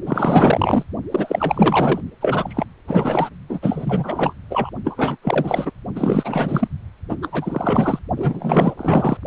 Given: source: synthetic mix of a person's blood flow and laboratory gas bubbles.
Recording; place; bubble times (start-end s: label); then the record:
Doppler ultrasound of blood flow; precordium
0.06-0.83 s: bubbles
1.11-2.00 s: bubbles
2.21-2.65 s: bubbles
2.88-3.29 s: bubbles
3.49-3.59 s: bubbles
3.62-4.34 s: bubbles
4.50-4.70 s: bubbles
4.84-5.17 s: bubbles
5.22-5.71 s: bubbles
5.95-6.68 s: bubbles
7.09-7.16 s: bubbles
7.22-7.29 s: bubbles
7.31-7.99 s: bubbles
8.16-8.73 s: bubbles
8.78-9.17 s: bubbles
From the record:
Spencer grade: 4 (maximum detectable bubble signal sounding continuously throughout systole and diastole of every cardiac period, and overriding the amplitude of the normal cardiac signals); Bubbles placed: only in the low amplitude regions of the cardiac cycle